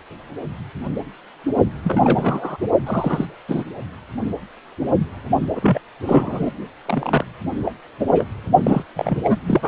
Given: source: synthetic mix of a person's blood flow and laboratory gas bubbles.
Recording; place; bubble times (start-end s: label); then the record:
Doppler ultrasound of blood flow; precordium
1.83-2.57 s: bubbles
2.86-3.25 s: bubbles
3.48-3.64 s: bubbles
5.55-5.79 s: bubbles
6.05-6.52 s: bubbles
6.85-7.25 s: bubbles
7.65-7.74 s: bubbles
8.00-8.26 s: bubbles
8.64-8.83 s: bubbles
8.96-9.21 s: bubbles
9.24-9.37 s: bubbles
9.48-9.68 s: bubbles
From the record:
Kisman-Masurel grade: 232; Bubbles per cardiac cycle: several, 3 to 8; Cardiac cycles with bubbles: 50 to 99%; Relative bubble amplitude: moderate (0.250 to 0.450); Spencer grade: 3 (all of the cardiac periods contain showers or single bubble signals, but not dominating or overriding the cardiac motion signals); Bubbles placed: only in the low amplitude regions of the cardiac cycle